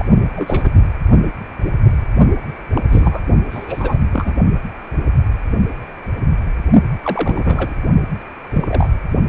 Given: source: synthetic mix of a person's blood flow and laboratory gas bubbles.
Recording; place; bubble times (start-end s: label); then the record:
Doppler ultrasound of blood flow; precordium
0.00-0.05 s: bubbles
0.35-0.75 s: bubbles
2.75-2.81 s: bubbles
2.89-3.21 s: bubbles
3.50-3.98 s: bubbles
4.13-4.35 s: bubbles
7.03-7.74 s: bubbles
8.53-8.88 s: bubbles
From the record:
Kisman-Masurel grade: 232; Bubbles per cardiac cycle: several, 3 to 8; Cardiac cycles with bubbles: 50 to 99%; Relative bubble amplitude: moderate (0.250 to 0.450); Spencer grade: 3 (all of the cardiac periods contain showers or single bubble signals, but not dominating or overriding the cardiac motion signals); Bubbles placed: only in the low amplitude regions of the cardiac cycle